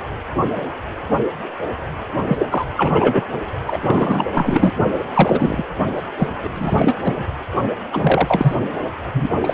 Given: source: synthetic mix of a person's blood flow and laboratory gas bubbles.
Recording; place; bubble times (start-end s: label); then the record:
Doppler ultrasound of blood flow; precordium
2.27-2.46 s: bubbles
2.50-2.66 s: bubbles
2.77-3.27 s: bubbles
3.67-4.25 s: bubbles
4.34-4.70 s: bubbles
4.87-5.04 s: bubbles
5.14-5.64 s: bubbles
5.95-6.03 s: bubbles
6.18-6.28 s: bubbles
6.43-6.49 s: bubbles
6.54-6.97 s: bubbles
7.03-7.25 s: bubbles
7.91-8.55 s: bubbles
9.12-9.29 s: bubbles
9.36-9.54 s: bubbles
From the record:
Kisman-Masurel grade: 333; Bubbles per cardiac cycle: rolling drumbeat, 9 or more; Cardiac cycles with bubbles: 50 to 99%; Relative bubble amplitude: loud (0.450 to 0.775); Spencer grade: 3 (all of the cardiac periods contain showers or single bubble signals, but not dominating or overriding the cardiac motion signals); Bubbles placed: anywhere in the cardiac cycle